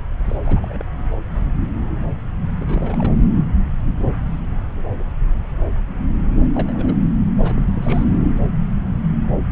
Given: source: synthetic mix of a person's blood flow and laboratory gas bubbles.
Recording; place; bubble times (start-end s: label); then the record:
Doppler ultrasound of blood flow; subclavian vein
0.28-0.82 s: bubbles
2.57-3.14 s: bubbles
6.54-7.02 s: bubbles
7.43-7.71 s: bubbles
7.75-8.27 s: bubbles
From the record:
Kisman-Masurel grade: 221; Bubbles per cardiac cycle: several, 3 to 8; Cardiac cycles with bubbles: 10 to 50%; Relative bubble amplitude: barely perceptible (0.100 to 0.250); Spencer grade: 2 (many but less than half of the cardiac periods contain bubble signals, singularly or in groups); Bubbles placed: anywhere in the cardiac cycle